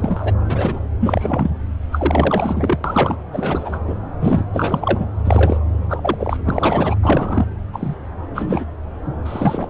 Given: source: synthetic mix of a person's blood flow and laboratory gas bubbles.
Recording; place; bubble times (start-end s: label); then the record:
Doppler ultrasound of blood flow; subclavian vein
0.00-0.34 s: bubbles
0.46-0.80 s: bubbles
0.99-1.50 s: bubbles
1.92-2.77 s: bubbles
2.84-3.17 s: bubbles
3.33-3.81 s: bubbles
3.87-3.96 s: bubbles
4.21-4.43 s: bubbles
4.53-5.07 s: bubbles
5.24-5.58 s: bubbles
5.88-6.37 s: bubbles
6.46-6.96 s: bubbles
7.02-7.46 s: bubbles
7.73-7.96 s: bubbles
8.33-8.65 s: bubbles
9.24-9.68 s: bubbles
From the record:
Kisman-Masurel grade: 243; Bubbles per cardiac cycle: several, 3 to 8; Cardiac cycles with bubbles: 100%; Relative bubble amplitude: loud (0.450 to 0.775); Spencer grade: 3 (all of the cardiac periods contain showers or single bubble signals, but not dominating or overriding the cardiac motion signals); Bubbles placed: anywhere in the cardiac cycle